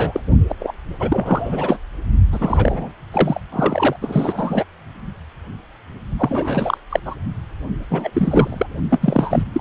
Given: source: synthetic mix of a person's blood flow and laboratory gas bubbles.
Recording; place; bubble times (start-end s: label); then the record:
Doppler ultrasound of blood flow; precordium
0.00-0.20 s: bubbles
0.48-0.56 s: bubbles
0.59-0.74 s: bubbles
0.99-1.79 s: bubbles
2.31-2.91 s: bubbles
3.12-3.40 s: bubbles
3.52-3.96 s: bubbles
4.01-4.64 s: bubbles
6.17-6.78 s: bubbles
6.91-7.00 s: bubbles
7.05-7.16 s: bubbles
7.90-8.66 s: bubbles
8.89-9.44 s: bubbles
9.53-9.61 s: bubbles
From the record:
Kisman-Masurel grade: 333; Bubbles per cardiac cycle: rolling drumbeat, 9 or more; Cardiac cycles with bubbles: 50 to 99%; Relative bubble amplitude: loud (0.450 to 0.775); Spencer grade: 3 (all of the cardiac periods contain showers or single bubble signals, but not dominating or overriding the cardiac motion signals); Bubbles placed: only in the low amplitude regions of the cardiac cycle